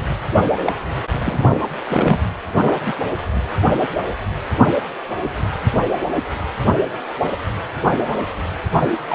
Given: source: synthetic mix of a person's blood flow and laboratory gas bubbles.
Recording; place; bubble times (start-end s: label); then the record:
Doppler ultrasound of blood flow; precordium
0.66-0.73 s: bubbles
1.21-1.61 s: bubbles
1.90-2.21 s: bubbles
2.49-2.80 s: bubbles
2.85-2.93 s: bubbles
9.06-9.15 s: bubbles
From the record:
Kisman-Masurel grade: 222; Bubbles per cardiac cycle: several, 3 to 8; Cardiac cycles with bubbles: 10 to 50%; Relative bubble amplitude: moderate (0.250 to 0.450); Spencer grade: 2 (many but less than half of the cardiac periods contain bubble signals, singularly or in groups); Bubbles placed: anywhere in the cardiac cycle